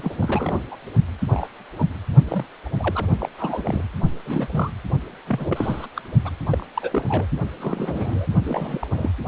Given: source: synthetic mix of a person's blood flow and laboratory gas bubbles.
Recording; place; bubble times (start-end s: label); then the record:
Doppler ultrasound of blood flow; precordium
0.00-0.13 s: bubbles
0.21-0.61 s: bubbles
0.69-0.76 s: bubbles
1.31-1.47 s: bubbles
1.76-1.86 s: bubbles
2.29-2.45 s: bubbles
2.79-3.07 s: bubbles
3.20-3.29 s: bubbles
3.38-3.83 s: bubbles
4.25-4.48 s: bubbles
4.52-4.73 s: bubbles
5.27-5.86 s: bubbles
5.96-6.02 s: bubbles
6.25-6.29 s: bubbles
6.50-6.66 s: bubbles
6.74-7.05 s: bubbles
7.08-7.27 s: bubbles
7.60-8.28 s: bubbles
8.44-8.88 s: bubbles
8.91-9.11 s: bubbles
From the record:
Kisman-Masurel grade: 242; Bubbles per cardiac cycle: several, 3 to 8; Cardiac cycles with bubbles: 100%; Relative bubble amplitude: moderate (0.250 to 0.450); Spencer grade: 3 (all of the cardiac periods contain showers or single bubble signals, but not dominating or overriding the cardiac motion signals); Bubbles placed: only in the low amplitude regions of the cardiac cycle